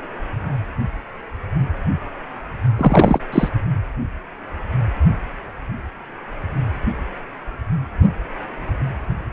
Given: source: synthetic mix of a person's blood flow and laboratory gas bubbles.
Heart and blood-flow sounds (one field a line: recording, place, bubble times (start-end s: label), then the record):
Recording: Doppler ultrasound of blood flow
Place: precordium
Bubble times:
2.77-3.20 s: bubbles
3.32-3.49 s: bubbles
From the record:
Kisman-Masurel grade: 213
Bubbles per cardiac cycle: several, 3 to 8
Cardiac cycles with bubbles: 1 to 10%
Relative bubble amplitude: loud (0.450 to 0.775)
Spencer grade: 1 (occasional bubble signal discernible with the cardiac motion signal, with majority of cardiac periods free of bubbles)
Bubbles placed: anywhere in the cardiac cycle